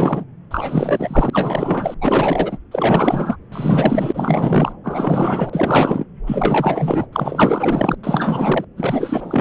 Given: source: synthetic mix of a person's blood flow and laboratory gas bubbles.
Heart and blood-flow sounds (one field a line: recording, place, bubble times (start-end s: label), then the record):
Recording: Doppler ultrasound of blood flow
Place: subclavian vein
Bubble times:
0.00-0.25 s: bubbles
0.51-1.95 s: bubbles
2.01-2.58 s: bubbles
2.71-3.36 s: bubbles
3.52-4.73 s: bubbles
4.84-6.04 s: bubbles
6.27-7.06 s: bubbles
7.12-7.95 s: bubbles
8.03-8.64 s: bubbles
8.77-9.41 s: bubbles
From the record:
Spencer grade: 4 (maximum detectable bubble signal sounding continuously throughout systole and diastole of every cardiac period, and overriding the amplitude of the normal cardiac signals)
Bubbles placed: anywhere in the cardiac cycle